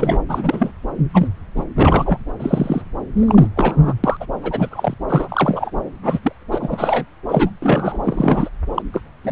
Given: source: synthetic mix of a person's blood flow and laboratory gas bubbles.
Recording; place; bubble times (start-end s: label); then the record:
Doppler ultrasound of blood flow; subclavian vein
0.00-0.18 s: bubbles
0.28-0.72 s: bubbles
1.14-1.27 s: bubbles
1.55-1.64 s: bubbles
1.76-2.18 s: bubbles
2.40-2.82 s: bubbles
3.17-3.48 s: bubbles
3.56-3.94 s: bubbles
4.04-4.17 s: bubbles
4.20-4.25 s: bubbles
4.42-4.68 s: bubbles
4.71-4.94 s: bubbles
5.08-5.71 s: bubbles
6.03-6.20 s: bubbles
6.23-6.32 s: bubbles
6.51-7.05 s: bubbles
7.29-7.51 s: bubbles
7.62-8.00 s: bubbles
8.04-8.50 s: bubbles
8.75-8.82 s: bubbles
8.93-9.01 s: bubbles
9.23-9.32 s: bubbles
From the record:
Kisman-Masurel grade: 243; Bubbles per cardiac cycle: several, 3 to 8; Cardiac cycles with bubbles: 100%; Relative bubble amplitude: loud (0.450 to 0.775); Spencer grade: 3 (all of the cardiac periods contain showers or single bubble signals, but not dominating or overriding the cardiac motion signals); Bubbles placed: anywhere in the cardiac cycle